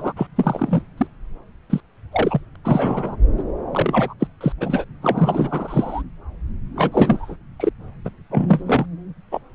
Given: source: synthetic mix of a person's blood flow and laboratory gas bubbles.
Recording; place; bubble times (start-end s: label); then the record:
Doppler ultrasound of blood flow; subclavian vein
0.00-0.13 s: bubbles
0.16-0.27 s: bubbles
0.35-0.82 s: bubbles
0.97-1.07 s: bubbles
1.69-1.80 s: bubbles
2.11-2.40 s: bubbles
2.63-3.17 s: bubbles
3.37-3.43 s: bubbles
3.71-4.14 s: bubbles
4.19-4.27 s: bubbles
4.41-4.53 s: bubbles
4.61-4.85 s: bubbles
5.02-6.02 s: bubbles
6.75-7.36 s: bubbles
7.60-7.70 s: bubbles
8.04-8.11 s: bubbles
8.30-8.62 s: bubbles
8.66-8.86 s: bubbles
9.31-9.40 s: bubbles
From the record:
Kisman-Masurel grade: 243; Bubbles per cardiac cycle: several, 3 to 8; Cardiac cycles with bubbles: 100%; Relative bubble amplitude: loud (0.450 to 0.775); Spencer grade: 3 (all of the cardiac periods contain showers or single bubble signals, but not dominating or overriding the cardiac motion signals); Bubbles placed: anywhere in the cardiac cycle